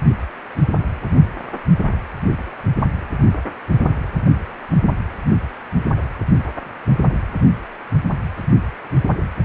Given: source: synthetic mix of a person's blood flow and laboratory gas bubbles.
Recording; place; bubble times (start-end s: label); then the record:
Doppler ultrasound of blood flow; precordium
no bubbles
From the record:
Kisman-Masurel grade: 000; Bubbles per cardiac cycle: 0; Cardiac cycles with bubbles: 0%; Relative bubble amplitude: no bubbles discernible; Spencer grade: 0 (complete lack of bubble signals)